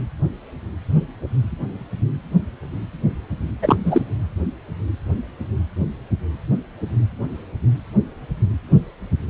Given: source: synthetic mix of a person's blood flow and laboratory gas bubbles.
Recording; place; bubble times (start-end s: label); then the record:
Doppler ultrasound of blood flow; precordium
3.62-3.77 s: bubbles
3.84-4.05 s: bubbles
From the record:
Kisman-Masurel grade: 213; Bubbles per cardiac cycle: several, 3 to 8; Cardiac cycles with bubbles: 1 to 10%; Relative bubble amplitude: loud (0.450 to 0.775); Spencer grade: 1 (occasional bubble signal discernible with the cardiac motion signal, with majority of cardiac periods free of bubbles); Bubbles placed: anywhere in the cardiac cycle